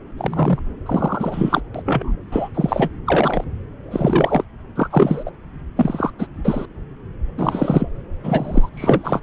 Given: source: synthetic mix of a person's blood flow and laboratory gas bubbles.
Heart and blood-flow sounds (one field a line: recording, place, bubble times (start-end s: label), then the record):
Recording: Doppler ultrasound of blood flow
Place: subclavian vein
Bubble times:
0.17-0.59 s: bubbles
0.85-1.60 s: bubbles
1.75-1.82 s: bubbles
1.85-2.17 s: bubbles
2.31-2.49 s: bubbles
2.54-2.90 s: bubbles
3.06-3.44 s: bubbles
3.90-4.44 s: bubbles
4.75-4.88 s: bubbles
4.90-5.31 s: bubbles
5.76-6.10 s: bubbles
6.19-6.27 s: bubbles
6.44-6.66 s: bubbles
7.38-7.89 s: bubbles
8.23-8.69 s: bubbles
8.74-9.21 s: bubbles
From the record:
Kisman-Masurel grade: 233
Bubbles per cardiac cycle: several, 3 to 8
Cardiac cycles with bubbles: 50 to 99%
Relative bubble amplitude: loud (0.450 to 0.775)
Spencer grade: 3 (all of the cardiac periods contain showers or single bubble signals, but not dominating or overriding the cardiac motion signals)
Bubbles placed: anywhere in the cardiac cycle